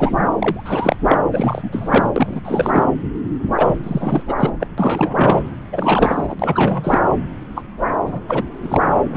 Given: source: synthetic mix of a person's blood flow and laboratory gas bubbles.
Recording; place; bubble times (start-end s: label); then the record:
Doppler ultrasound of blood flow; subclavian vein
0.00-0.30 s: bubbles
0.39-0.96 s: bubbles
1.04-1.19 s: bubbles
1.31-2.11 s: bubbles
2.16-2.40 s: bubbles
2.45-2.85 s: bubbles
3.56-3.66 s: bubbles
3.83-4.23 s: bubbles
4.28-4.33 s: bubbles
4.37-4.50 s: bubbles
4.60-4.67 s: bubbles
4.78-5.45 s: bubbles
5.72-6.36 s: bubbles
6.39-7.00 s: bubbles
7.55-7.63 s: bubbles
8.04-8.21 s: bubbles
8.28-8.43 s: bubbles
8.63-8.80 s: bubbles
9.12-9.17 s: bubbles
From the record:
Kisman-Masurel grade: 342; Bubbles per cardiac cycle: rolling drumbeat, 9 or more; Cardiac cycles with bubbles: 100%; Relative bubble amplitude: moderate (0.250 to 0.450); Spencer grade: 3 (all of the cardiac periods contain showers or single bubble signals, but not dominating or overriding the cardiac motion signals); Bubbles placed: anywhere in the cardiac cycle